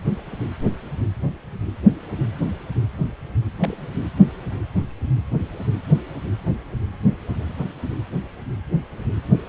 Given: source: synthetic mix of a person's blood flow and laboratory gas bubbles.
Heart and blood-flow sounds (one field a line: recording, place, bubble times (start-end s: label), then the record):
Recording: Doppler ultrasound of blood flow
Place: precordium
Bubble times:
3.60-3.82 s: bubbles
From the record:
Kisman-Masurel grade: 111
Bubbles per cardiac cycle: 1 to 2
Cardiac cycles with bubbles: 1 to 10%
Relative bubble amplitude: barely perceptible (0.100 to 0.250)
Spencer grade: 1 (occasional bubble signal discernible with the cardiac motion signal, with majority of cardiac periods free of bubbles)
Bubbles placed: anywhere in the cardiac cycle